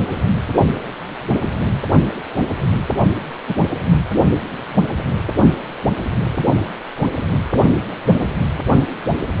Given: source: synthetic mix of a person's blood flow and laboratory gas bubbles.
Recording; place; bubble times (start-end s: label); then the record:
Doppler ultrasound of blood flow; precordium
3.47-3.55 s: bubbles
From the record:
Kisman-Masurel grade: 123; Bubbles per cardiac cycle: 1 to 2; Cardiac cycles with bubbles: 10 to 50%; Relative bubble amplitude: loud (0.450 to 0.775); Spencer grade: 2 (many but less than half of the cardiac periods contain bubble signals, singularly or in groups); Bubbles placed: anywhere in the cardiac cycle